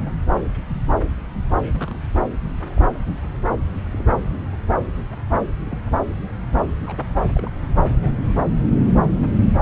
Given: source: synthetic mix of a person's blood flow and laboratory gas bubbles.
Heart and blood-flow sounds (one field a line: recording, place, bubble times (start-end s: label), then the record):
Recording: Doppler ultrasound of blood flow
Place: subclavian vein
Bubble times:
0.41-0.53 s: bubbles
0.71-0.83 s: bubbles
1.74-1.98 s: bubbles
2.61-2.85 s: bubbles
2.93-3.04 s: bubbles
3.92-4.03 s: bubbles
4.32-4.36 s: bubbles
5.66-5.78 s: bubbles
6.86-6.96 s: bubbles
7.37-7.50 s: bubbles
7.63-7.67 s: bubbles
7.88-8.12 s: bubbles
From the record:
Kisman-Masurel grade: 121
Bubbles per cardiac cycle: 1 to 2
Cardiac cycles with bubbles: 10 to 50%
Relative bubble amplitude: barely perceptible (0.100 to 0.250)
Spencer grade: 2 (many but less than half of the cardiac periods contain bubble signals, singularly or in groups)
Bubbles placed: anywhere in the cardiac cycle